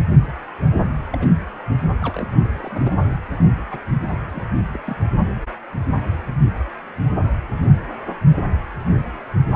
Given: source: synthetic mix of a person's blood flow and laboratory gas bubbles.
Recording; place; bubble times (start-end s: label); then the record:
Doppler ultrasound of blood flow; precordium
1.10-1.29 s: bubbles
2.01-2.28 s: bubbles
2.44-2.96 s: bubbles
3.70-3.81 s: bubbles
4.11-4.16 s: bubbles
4.23-4.80 s: bubbles
4.85-4.96 s: bubbles
From the record:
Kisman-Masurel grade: 221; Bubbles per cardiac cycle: several, 3 to 8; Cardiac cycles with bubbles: 10 to 50%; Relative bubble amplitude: barely perceptible (0.100 to 0.250); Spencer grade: 2 (many but less than half of the cardiac periods contain bubble signals, singularly or in groups); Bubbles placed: only in the low amplitude regions of the cardiac cycle